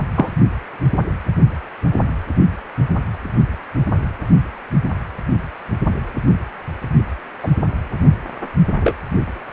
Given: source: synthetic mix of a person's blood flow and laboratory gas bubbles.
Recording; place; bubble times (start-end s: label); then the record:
Doppler ultrasound of blood flow; precordium
0.14-0.29 s: bubbles
7.43-7.47 s: bubbles
8.80-8.94 s: bubbles
From the record:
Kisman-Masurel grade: 123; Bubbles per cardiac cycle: 1 to 2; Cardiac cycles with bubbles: 10 to 50%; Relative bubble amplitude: loud (0.450 to 0.775); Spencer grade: 2 (many but less than half of the cardiac periods contain bubble signals, singularly or in groups); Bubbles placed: only in the low amplitude regions of the cardiac cycle